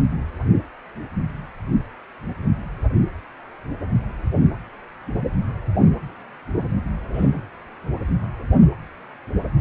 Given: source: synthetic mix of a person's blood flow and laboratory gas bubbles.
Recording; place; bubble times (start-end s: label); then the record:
Doppler ultrasound of blood flow; precordium
7.13-7.42 s: bubbles
From the record:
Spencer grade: 1 (occasional bubble signal discernible with the cardiac motion signal, with majority of cardiac periods free of bubbles); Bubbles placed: anywhere in the cardiac cycle